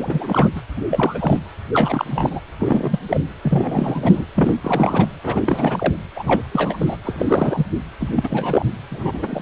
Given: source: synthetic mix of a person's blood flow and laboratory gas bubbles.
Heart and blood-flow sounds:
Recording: Doppler ultrasound of blood flow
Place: precordium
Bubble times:
0.00-0.48 s: bubbles
0.55-0.61 s: bubbles
0.77-0.85 s: bubbles
0.90-1.40 s: bubbles
1.73-2.05 s: bubbles
2.10-2.41 s: bubbles
2.59-2.99 s: bubbles
3.08-3.21 s: bubbles
3.42-4.27 s: bubbles
4.35-5.08 s: bubbles
5.23-5.96 s: bubbles
6.16-6.44 s: bubbles
6.52-6.97 s: bubbles
7.04-7.66 s: bubbles
8.00-8.67 s: bubbles
8.90-9.42 s: bubbles
From the record:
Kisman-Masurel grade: 343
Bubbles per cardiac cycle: rolling drumbeat, 9 or more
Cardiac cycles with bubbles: 100%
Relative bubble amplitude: loud (0.450 to 0.775)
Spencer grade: 3 (all of the cardiac periods contain showers or single bubble signals, but not dominating or overriding the cardiac motion signals)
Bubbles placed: anywhere in the cardiac cycle

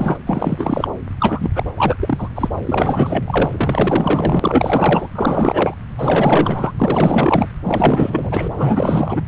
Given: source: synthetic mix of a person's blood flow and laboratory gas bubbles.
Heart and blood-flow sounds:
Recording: Doppler ultrasound of blood flow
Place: subclavian vein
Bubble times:
0.00-0.18 s: bubbles
0.26-0.88 s: bubbles
1.19-1.51 s: bubbles
1.54-1.64 s: bubbles
1.77-1.96 s: bubbles
2.00-2.29 s: bubbles
2.35-2.48 s: bubbles
2.61-5.09 s: bubbles
5.15-5.74 s: bubbles
5.97-6.72 s: bubbles
6.79-7.48 s: bubbles
7.64-9.21 s: bubbles
From the record:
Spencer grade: 4 (maximum detectable bubble signal sounding continuously throughout systole and diastole of every cardiac period, and overriding the amplitude of the normal cardiac signals)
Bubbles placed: anywhere in the cardiac cycle

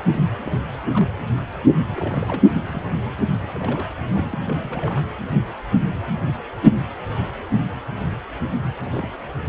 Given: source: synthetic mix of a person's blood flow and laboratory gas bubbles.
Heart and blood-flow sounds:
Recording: Doppler ultrasound of blood flow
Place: precordium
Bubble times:
0.46-0.52 s: bubbles
0.72-0.77 s: bubbles
0.93-1.06 s: bubbles
1.86-2.42 s: bubbles
2.56-2.83 s: bubbles
3.43-3.47 s: bubbles
3.51-3.89 s: bubbles
4.10-4.38 s: bubbles
4.49-5.01 s: bubbles
8.77-9.11 s: bubbles
From the record:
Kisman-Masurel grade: 221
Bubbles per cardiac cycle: several, 3 to 8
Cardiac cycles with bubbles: 10 to 50%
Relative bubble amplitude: barely perceptible (0.100 to 0.250)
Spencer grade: 2 (many but less than half of the cardiac periods contain bubble signals, singularly or in groups)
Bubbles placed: anywhere in the cardiac cycle

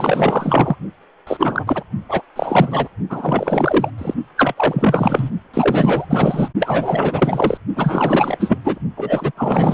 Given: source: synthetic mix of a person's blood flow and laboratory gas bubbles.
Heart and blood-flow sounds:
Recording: Doppler ultrasound of blood flow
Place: precordium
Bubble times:
0.00-0.76 s: bubbles
1.27-1.64 s: bubbles
1.67-1.83 s: bubbles
2.09-2.22 s: bubbles
2.35-2.88 s: bubbles
3.10-3.91 s: bubbles
3.97-4.14 s: bubbles
4.37-5.30 s: bubbles
5.54-6.07 s: bubbles
6.10-6.48 s: bubbles
6.59-7.58 s: bubbles
7.75-8.58 s: bubbles
8.64-8.79 s: bubbles
8.96-9.31 s: bubbles
9.36-9.74 s: bubbles
From the record:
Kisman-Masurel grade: 444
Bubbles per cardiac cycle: continuous sound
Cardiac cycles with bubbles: 100%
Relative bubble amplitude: maximal (0.775 to 0.999)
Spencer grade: 4 (maximum detectable bubble signal sounding continuously throughout systole and diastole of every cardiac period, and overriding the amplitude of the normal cardiac signals)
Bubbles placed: only in the low amplitude regions of the cardiac cycle

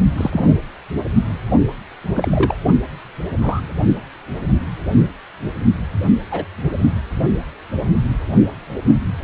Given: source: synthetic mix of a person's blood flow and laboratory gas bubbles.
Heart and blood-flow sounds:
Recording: Doppler ultrasound of blood flow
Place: precordium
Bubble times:
0.17-0.58 s: bubbles
2.14-2.54 s: bubbles
3.41-3.61 s: bubbles
6.30-6.45 s: bubbles
From the record:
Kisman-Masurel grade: 123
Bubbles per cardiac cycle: 1 to 2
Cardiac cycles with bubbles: 10 to 50%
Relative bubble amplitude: loud (0.450 to 0.775)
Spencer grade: 2 (many but less than half of the cardiac periods contain bubble signals, singularly or in groups)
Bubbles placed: only in the low amplitude regions of the cardiac cycle

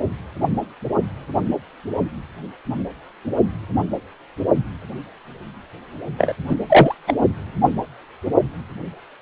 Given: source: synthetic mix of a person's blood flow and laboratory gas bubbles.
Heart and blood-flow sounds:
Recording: Doppler ultrasound of blood flow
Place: precordium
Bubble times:
6.18-6.33 s: bubbles
6.49-6.56 s: bubbles
6.69-6.95 s: bubbles
7.07-7.14 s: bubbles
From the record:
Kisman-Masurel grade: 213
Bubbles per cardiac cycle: several, 3 to 8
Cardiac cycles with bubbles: 1 to 10%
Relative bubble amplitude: loud (0.450 to 0.775)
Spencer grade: 1 (occasional bubble signal discernible with the cardiac motion signal, with majority of cardiac periods free of bubbles)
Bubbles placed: only in the low amplitude regions of the cardiac cycle

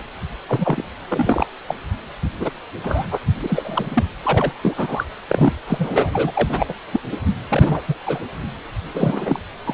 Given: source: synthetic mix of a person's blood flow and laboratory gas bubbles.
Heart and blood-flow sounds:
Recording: Doppler ultrasound of blood flow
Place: precordium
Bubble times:
0.00-0.03 s: bubbles
0.47-0.82 s: bubbles
1.08-1.47 s: bubbles
1.68-1.74 s: bubbles
2.39-2.50 s: bubbles
2.83-3.07 s: bubbles
3.11-3.17 s: bubbles
3.42-4.03 s: bubbles
4.22-4.53 s: bubbles
4.62-5.04 s: bubbles
5.29-5.53 s: bubbles
5.67-6.31 s: bubbles
6.34-6.74 s: bubbles
6.92-7.00 s: bubbles
7.11-7.17 s: bubbles
7.49-7.81 s: bubbles
7.88-7.95 s: bubbles
8.05-8.20 s: bubbles
8.95-9.39 s: bubbles
9.64-9.73 s: bubbles
From the record:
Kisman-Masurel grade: 242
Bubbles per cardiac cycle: several, 3 to 8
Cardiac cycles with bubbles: 100%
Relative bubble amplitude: moderate (0.250 to 0.450)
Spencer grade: 3 (all of the cardiac periods contain showers or single bubble signals, but not dominating or overriding the cardiac motion signals)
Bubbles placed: anywhere in the cardiac cycle

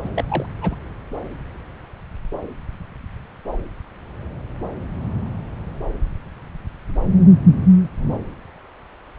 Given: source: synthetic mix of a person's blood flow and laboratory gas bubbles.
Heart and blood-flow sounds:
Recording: Doppler ultrasound of blood flow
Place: subclavian vein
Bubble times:
0.03-0.10 s: bubbles
0.15-0.24 s: bubbles
0.29-0.46 s: bubbles
0.61-0.75 s: bubbles
From the record:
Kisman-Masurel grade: 211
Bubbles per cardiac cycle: several, 3 to 8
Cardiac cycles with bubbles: 1 to 10%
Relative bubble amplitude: barely perceptible (0.100 to 0.250)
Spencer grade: 1 (occasional bubble signal discernible with the cardiac motion signal, with majority of cardiac periods free of bubbles)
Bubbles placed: anywhere in the cardiac cycle

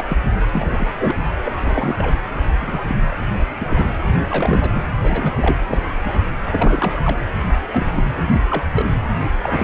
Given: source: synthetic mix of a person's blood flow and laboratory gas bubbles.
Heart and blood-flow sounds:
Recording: Doppler ultrasound of blood flow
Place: precordium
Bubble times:
0.00-0.04 s: bubbles
0.09-0.17 s: bubbles
0.53-0.88 s: bubbles
0.98-1.16 s: bubbles
1.45-2.19 s: bubbles
2.60-2.97 s: bubbles
3.60-3.94 s: bubbles
4.07-4.17 s: bubbles
4.30-4.81 s: bubbles
5.03-5.36 s: bubbles
5.42-5.56 s: bubbles
5.69-5.83 s: bubbles
6.04-6.14 s: bubbles
6.51-7.00 s: bubbles
7.03-7.17 s: bubbles
7.54-8.04 s: bubbles
8.31-8.41 s: bubbles
8.49-8.63 s: bubbles
8.75-8.85 s: bubbles
9.43-9.64 s: bubbles
From the record:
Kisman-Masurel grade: 242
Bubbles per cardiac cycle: several, 3 to 8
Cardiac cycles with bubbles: 100%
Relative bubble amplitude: moderate (0.250 to 0.450)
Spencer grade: 3 (all of the cardiac periods contain showers or single bubble signals, but not dominating or overriding the cardiac motion signals)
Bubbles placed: anywhere in the cardiac cycle

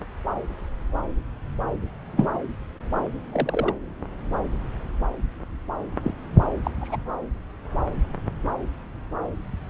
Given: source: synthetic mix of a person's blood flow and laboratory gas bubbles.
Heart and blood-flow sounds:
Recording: Doppler ultrasound of blood flow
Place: subclavian vein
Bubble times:
2.13-2.26 s: bubbles
3.32-3.74 s: bubbles
6.04-6.14 s: bubbles
6.64-6.71 s: bubbles
6.80-6.96 s: bubbles
From the record:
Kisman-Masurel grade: 122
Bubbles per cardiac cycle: 1 to 2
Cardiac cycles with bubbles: 10 to 50%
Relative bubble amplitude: moderate (0.250 to 0.450)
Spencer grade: 2 (many but less than half of the cardiac periods contain bubble signals, singularly or in groups)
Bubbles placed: anywhere in the cardiac cycle

